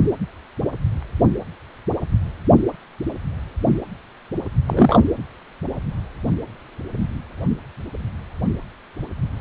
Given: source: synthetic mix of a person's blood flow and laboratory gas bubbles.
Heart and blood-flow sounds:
Doppler ultrasound of blood flow; precordium
4.67-4.99 s: bubbles
From the record:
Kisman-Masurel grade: 113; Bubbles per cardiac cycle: 1 to 2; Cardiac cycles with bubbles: 1 to 10%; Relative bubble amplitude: loud (0.450 to 0.775); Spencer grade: 1 (occasional bubble signal discernible with the cardiac motion signal, with majority of cardiac periods free of bubbles); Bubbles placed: anywhere in the cardiac cycle

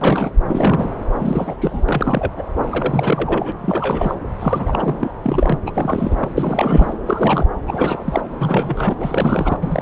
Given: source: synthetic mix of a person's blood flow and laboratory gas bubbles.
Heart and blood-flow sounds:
Doppler ultrasound of blood flow; subclavian vein
0.01-0.31 s: bubbles
0.46-0.91 s: bubbles
1.18-1.54 s: bubbles
1.60-1.84 s: bubbles
1.89-2.33 s: bubbles
2.37-2.43 s: bubbles
2.70-3.53 s: bubbles
3.58-4.14 s: bubbles
4.39-4.96 s: bubbles
4.99-5.12 s: bubbles
5.22-5.58 s: bubbles
5.66-6.29 s: bubbles
6.37-6.94 s: bubbles
7.05-7.46 s: bubbles
7.67-8.21 s: bubbles
8.38-8.95 s: bubbles
8.99-9.58 s: bubbles
9.62-9.82 s: bubbles
From the record:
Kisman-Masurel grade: 342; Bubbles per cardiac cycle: rolling drumbeat, 9 or more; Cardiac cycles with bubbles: 100%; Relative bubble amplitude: moderate (0.250 to 0.450); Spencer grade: 3 (all of the cardiac periods contain showers or single bubble signals, but not dominating or overriding the cardiac motion signals); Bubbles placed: anywhere in the cardiac cycle

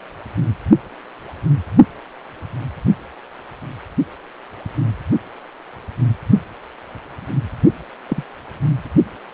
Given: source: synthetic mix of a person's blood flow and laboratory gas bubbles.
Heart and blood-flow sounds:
Doppler ultrasound of blood flow; precordium
8.08-8.23 s: bubbles
From the record:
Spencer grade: 1 (occasional bubble signal discernible with the cardiac motion signal, with majority of cardiac periods free of bubbles); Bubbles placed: only in the low amplitude regions of the cardiac cycle

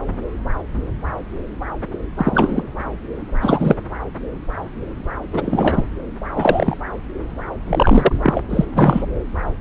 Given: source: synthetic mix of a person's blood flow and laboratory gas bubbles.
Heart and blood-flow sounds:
Doppler ultrasound of blood flow; subclavian vein
2.17-2.62 s: bubbles
3.41-3.75 s: bubbles
5.33-5.83 s: bubbles
6.36-6.77 s: bubbles
7.67-8.12 s: bubbles
8.22-8.42 s: bubbles
8.49-8.65 s: bubbles
8.74-9.03 s: bubbles
From the record:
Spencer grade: 2 (many but less than half of the cardiac periods contain bubble signals, singularly or in groups); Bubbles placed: anywhere in the cardiac cycle

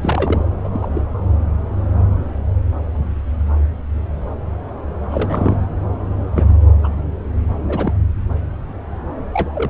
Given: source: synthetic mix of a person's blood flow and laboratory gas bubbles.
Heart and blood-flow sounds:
Doppler ultrasound of blood flow; subclavian vein
0.01-0.45 s: bubbles
0.64-0.68 s: bubbles
0.72-0.87 s: bubbles
0.93-1.01 s: bubbles
5.10-5.57 s: bubbles
6.35-6.58 s: bubbles
6.83-6.89 s: bubbles
7.68-7.94 s: bubbles
9.33-9.70 s: bubbles
From the record:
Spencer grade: 2 (many but less than half of the cardiac periods contain bubble signals, singularly or in groups); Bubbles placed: anywhere in the cardiac cycle

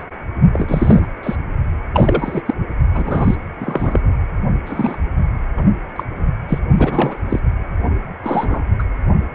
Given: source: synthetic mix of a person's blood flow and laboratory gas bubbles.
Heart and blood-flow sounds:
Doppler ultrasound of blood flow; precordium
0.00-0.03 s: bubbles
0.53-1.07 s: bubbles
1.23-1.35 s: bubbles
1.94-2.42 s: bubbles
2.46-2.54 s: bubbles
2.94-3.35 s: bubbles
3.60-4.00 s: bubbles
4.66-4.98 s: bubbles
5.56-5.63 s: bubbles
5.95-6.03 s: bubbles
6.48-6.59 s: bubbles
6.77-7.20 s: bubbles
7.29-7.39 s: bubbles
8.23-8.60 s: bubbles
8.79-8.83 s: bubbles
From the record:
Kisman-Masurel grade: 242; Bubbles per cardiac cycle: several, 3 to 8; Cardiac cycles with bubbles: 100%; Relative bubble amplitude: moderate (0.250 to 0.450); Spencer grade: 3 (all of the cardiac periods contain showers or single bubble signals, but not dominating or overriding the cardiac motion signals); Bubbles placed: only in the low amplitude regions of the cardiac cycle

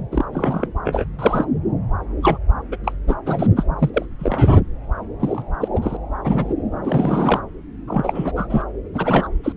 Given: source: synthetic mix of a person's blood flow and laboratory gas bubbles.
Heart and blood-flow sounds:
Doppler ultrasound of blood flow; subclavian vein
0.11-0.25 s: bubbles
0.33-0.67 s: bubbles
0.84-1.04 s: bubbles
1.18-1.45 s: bubbles
2.22-2.38 s: bubbles
2.71-2.77 s: bubbles
2.83-2.92 s: bubbles
3.07-3.15 s: bubbles
3.25-3.46 s: bubbles
3.56-3.63 s: bubbles
3.78-3.90 s: bubbles
3.94-4.06 s: bubbles
4.19-4.57 s: bubbles
5.20-5.42 s: bubbles
5.61-5.68 s: bubbles
5.75-5.97 s: bubbles
6.24-6.54 s: bubbles
6.83-7.41 s: bubbles
7.88-8.32 s: bubbles
8.36-8.62 s: bubbles
8.94-9.28 s: bubbles
9.44-9.53 s: bubbles
From the record:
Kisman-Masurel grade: 242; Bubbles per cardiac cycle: several, 3 to 8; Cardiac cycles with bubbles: 100%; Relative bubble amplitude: moderate (0.250 to 0.450); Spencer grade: 3 (all of the cardiac periods contain showers or single bubble signals, but not dominating or overriding the cardiac motion signals); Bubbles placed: anywhere in the cardiac cycle

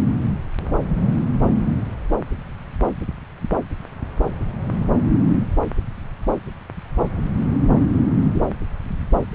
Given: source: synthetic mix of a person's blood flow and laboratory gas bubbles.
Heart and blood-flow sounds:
Doppler ultrasound of blood flow; subclavian vein
8.34-8.40 s: bubbles
From the record:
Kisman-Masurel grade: 113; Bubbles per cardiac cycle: 1 to 2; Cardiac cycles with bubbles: 1 to 10%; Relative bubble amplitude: loud (0.450 to 0.775); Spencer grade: 1 (occasional bubble signal discernible with the cardiac motion signal, with majority of cardiac periods free of bubbles); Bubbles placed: anywhere in the cardiac cycle

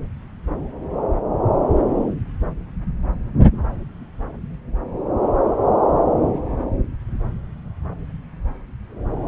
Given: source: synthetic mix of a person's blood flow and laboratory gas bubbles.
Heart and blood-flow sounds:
Doppler ultrasound of blood flow; subclavian vein
no bubbles
From the record:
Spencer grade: 0 (complete lack of bubble signals)

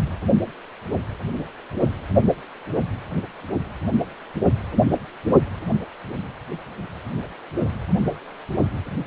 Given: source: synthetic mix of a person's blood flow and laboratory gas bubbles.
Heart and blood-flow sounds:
Doppler ultrasound of blood flow; precordium
no bubbles
From the record:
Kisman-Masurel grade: 000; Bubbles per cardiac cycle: 0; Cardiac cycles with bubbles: 0%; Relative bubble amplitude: no bubbles discernible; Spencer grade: 0 (complete lack of bubble signals)

